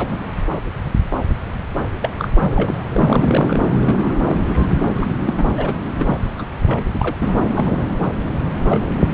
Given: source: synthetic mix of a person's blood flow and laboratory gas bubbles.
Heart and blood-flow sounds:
Doppler ultrasound of blood flow; subclavian vein
0.00-0.08 s: bubbles
0.11-0.17 s: bubbles
2.02-2.09 s: bubbles
2.19-2.28 s: bubbles
2.35-2.74 s: bubbles
2.88-3.60 s: bubbles
3.85-4.13 s: bubbles
4.23-4.38 s: bubbles
4.53-4.74 s: bubbles
4.93-5.34 s: bubbles
5.37-5.44 s: bubbles
5.57-5.73 s: bubbles
5.98-6.16 s: bubbles
6.38-6.46 s: bubbles
6.64-7.15 s: bubbles
7.54-8.01 s: bubbles
8.68-8.92 s: bubbles
From the record:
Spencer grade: 3 (all of the cardiac periods contain showers or single bubble signals, but not dominating or overriding the cardiac motion signals); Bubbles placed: anywhere in the cardiac cycle

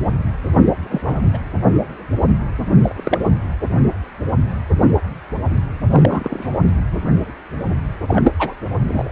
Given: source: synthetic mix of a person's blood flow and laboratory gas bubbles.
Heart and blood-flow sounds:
Doppler ultrasound of blood flow; precordium
0.65-0.74 s: bubbles
0.81-1.30 s: bubbles
1.33-1.38 s: bubbles
2.82-3.27 s: bubbles
5.89-6.56 s: bubbles
8.08-8.32 s: bubbles
8.39-8.54 s: bubbles
8.88-9.12 s: bubbles
From the record:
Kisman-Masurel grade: 232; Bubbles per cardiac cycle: several, 3 to 8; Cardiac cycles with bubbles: 50 to 99%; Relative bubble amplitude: moderate (0.250 to 0.450); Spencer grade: 3 (all of the cardiac periods contain showers or single bubble signals, but not dominating or overriding the cardiac motion signals); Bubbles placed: anywhere in the cardiac cycle

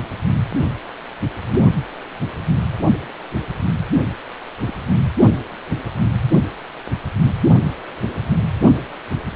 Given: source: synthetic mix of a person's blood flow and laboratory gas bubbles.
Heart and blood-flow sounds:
Doppler ultrasound of blood flow; precordium
4.66-4.74 s: bubbles
From the record:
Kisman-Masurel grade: 111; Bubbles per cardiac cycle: 1 to 2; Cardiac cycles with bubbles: 1 to 10%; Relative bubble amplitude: barely perceptible (0.100 to 0.250); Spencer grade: 1 (occasional bubble signal discernible with the cardiac motion signal, with majority of cardiac periods free of bubbles); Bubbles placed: only in the low amplitude regions of the cardiac cycle

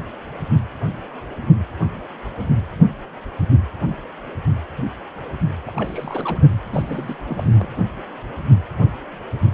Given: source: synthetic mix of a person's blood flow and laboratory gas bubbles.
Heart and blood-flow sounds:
Doppler ultrasound of blood flow; precordium
5.66-6.47 s: bubbles
6.67-7.16 s: bubbles
7.27-7.68 s: bubbles
From the record:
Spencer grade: 2 (many but less than half of the cardiac periods contain bubble signals, singularly or in groups); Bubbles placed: anywhere in the cardiac cycle

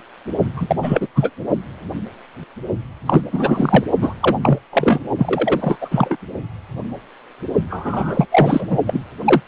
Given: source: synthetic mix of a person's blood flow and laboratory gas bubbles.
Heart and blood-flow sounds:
Doppler ultrasound of blood flow; precordium
0.56-0.76 s: bubbles
0.82-1.08 s: bubbles
1.15-1.31 s: bubbles
3.06-3.21 s: bubbles
3.32-3.84 s: bubbles
4.01-4.13 s: bubbles
4.20-4.36 s: bubbles
4.41-4.58 s: bubbles
4.72-5.00 s: bubbles
5.18-5.77 s: bubbles
5.80-6.17 s: bubbles
7.69-8.26 s: bubbles
8.32-8.78 s: bubbles
8.87-9.01 s: bubbles
9.25-9.41 s: bubbles
From the record:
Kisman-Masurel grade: 333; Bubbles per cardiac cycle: rolling drumbeat, 9 or more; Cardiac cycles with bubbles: 50 to 99%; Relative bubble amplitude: loud (0.450 to 0.775); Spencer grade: 3 (all of the cardiac periods contain showers or single bubble signals, but not dominating or overriding the cardiac motion signals); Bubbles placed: only in the low amplitude regions of the cardiac cycle

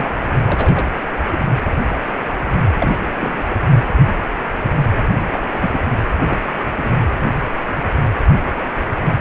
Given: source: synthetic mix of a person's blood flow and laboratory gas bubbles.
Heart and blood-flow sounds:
Doppler ultrasound of blood flow; precordium
0.00-0.09 s: bubbles
0.20-0.24 s: bubbles
0.46-0.90 s: bubbles
1.32-1.38 s: bubbles
2.78-2.98 s: bubbles
3.20-3.68 s: bubbles
5.32-5.88 s: bubbles
6.26-6.39 s: bubbles
6.46-6.53 s: bubbles
6.67-7.04 s: bubbles
From the record:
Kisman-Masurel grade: 221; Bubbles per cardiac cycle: several, 3 to 8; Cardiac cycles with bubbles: 10 to 50%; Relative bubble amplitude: barely perceptible (0.100 to 0.250); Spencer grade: 2 (many but less than half of the cardiac periods contain bubble signals, singularly or in groups); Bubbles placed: anywhere in the cardiac cycle

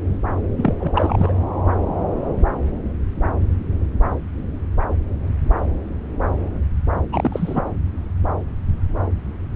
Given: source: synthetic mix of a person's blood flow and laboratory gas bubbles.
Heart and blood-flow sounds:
Doppler ultrasound of blood flow; subclavian vein
0.57-0.74 s: bubbles
0.80-1.33 s: bubbles
7.12-7.64 s: bubbles
From the record:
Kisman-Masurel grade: 222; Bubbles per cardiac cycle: several, 3 to 8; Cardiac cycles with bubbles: 10 to 50%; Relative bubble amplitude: moderate (0.250 to 0.450); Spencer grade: 2 (many but less than half of the cardiac periods contain bubble signals, singularly or in groups); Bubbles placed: anywhere in the cardiac cycle

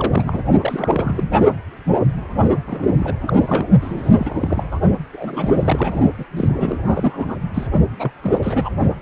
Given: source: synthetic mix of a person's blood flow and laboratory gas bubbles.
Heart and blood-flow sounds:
Doppler ultrasound of blood flow; precordium
0.00-0.43 s: bubbles
0.60-1.30 s: bubbles
2.67-2.87 s: bubbles
2.96-3.16 s: bubbles
3.22-3.66 s: bubbles
3.81-4.14 s: bubbles
4.17-4.65 s: bubbles
4.71-4.79 s: bubbles
5.12-6.00 s: bubbles
6.19-6.25 s: bubbles
6.36-6.77 s: bubbles
6.85-7.36 s: bubbles
7.54-7.67 s: bubbles
7.99-8.12 s: bubbles
8.21-8.69 s: bubbles
From the record:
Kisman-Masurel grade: 332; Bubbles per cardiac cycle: rolling drumbeat, 9 or more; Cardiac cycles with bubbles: 50 to 99%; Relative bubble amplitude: moderate (0.250 to 0.450); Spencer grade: 3 (all of the cardiac periods contain showers or single bubble signals, but not dominating or overriding the cardiac motion signals); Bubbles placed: only in the low amplitude regions of the cardiac cycle

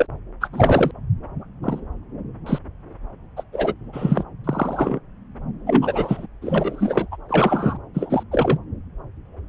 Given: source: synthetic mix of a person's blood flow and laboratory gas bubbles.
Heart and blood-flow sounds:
Doppler ultrasound of blood flow; subclavian vein
0.00-0.07 s: bubbles
0.41-0.48 s: bubbles
0.52-0.91 s: bubbles
1.63-1.80 s: bubbles
2.46-2.58 s: bubbles
3.36-3.44 s: bubbles
3.52-3.74 s: bubbles
3.92-4.24 s: bubbles
4.44-4.99 s: bubbles
5.67-6.26 s: bubbles
6.41-7.06 s: bubbles
7.11-7.17 s: bubbles
7.29-7.77 s: bubbles
7.94-8.23 s: bubbles
8.31-8.59 s: bubbles
From the record:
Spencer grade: 3 (all of the cardiac periods contain showers or single bubble signals, but not dominating or overriding the cardiac motion signals); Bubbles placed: anywhere in the cardiac cycle

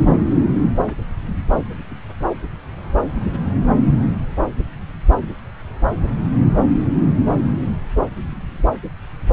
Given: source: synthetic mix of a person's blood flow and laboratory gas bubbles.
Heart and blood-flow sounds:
Doppler ultrasound of blood flow; subclavian vein
0.86-0.95 s: bubbles
From the record:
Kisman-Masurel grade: 112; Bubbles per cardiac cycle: 1 to 2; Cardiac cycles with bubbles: 1 to 10%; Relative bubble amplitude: moderate (0.250 to 0.450); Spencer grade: 1 (occasional bubble signal discernible with the cardiac motion signal, with majority of cardiac periods free of bubbles); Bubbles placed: anywhere in the cardiac cycle

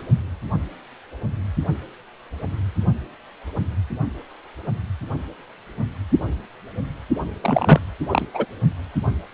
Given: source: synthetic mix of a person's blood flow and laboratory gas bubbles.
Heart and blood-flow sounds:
Doppler ultrasound of blood flow; precordium
7.42-7.79 s: bubbles
8.10-8.26 s: bubbles
8.34-8.46 s: bubbles
From the record:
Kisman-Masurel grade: 213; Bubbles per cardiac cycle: several, 3 to 8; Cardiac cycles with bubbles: 1 to 10%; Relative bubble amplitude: loud (0.450 to 0.775); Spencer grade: 1 (occasional bubble signal discernible with the cardiac motion signal, with majority of cardiac periods free of bubbles); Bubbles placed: only in the low amplitude regions of the cardiac cycle

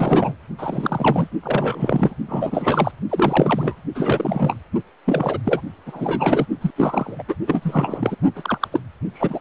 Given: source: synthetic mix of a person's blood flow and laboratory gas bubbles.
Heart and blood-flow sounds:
Doppler ultrasound of blood flow; precordium
0.00-0.35 s: bubbles
0.58-1.28 s: bubbles
1.43-2.14 s: bubbles
2.28-2.92 s: bubbles
3.09-3.76 s: bubbles
3.95-4.57 s: bubbles
5.05-5.41 s: bubbles
5.43-5.61 s: bubbles
5.86-6.46 s: bubbles
6.61-6.71 s: bubbles
6.76-7.23 s: bubbles
7.28-7.35 s: bubbles
7.46-8.16 s: bubbles
8.35-8.68 s: bubbles
8.71-8.81 s: bubbles
9.14-9.40 s: bubbles
From the record:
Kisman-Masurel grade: 343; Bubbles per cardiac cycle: rolling drumbeat, 9 or more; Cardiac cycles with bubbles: 100%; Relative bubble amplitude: loud (0.450 to 0.775); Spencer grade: 3 (all of the cardiac periods contain showers or single bubble signals, but not dominating or overriding the cardiac motion signals); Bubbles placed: only in the low amplitude regions of the cardiac cycle

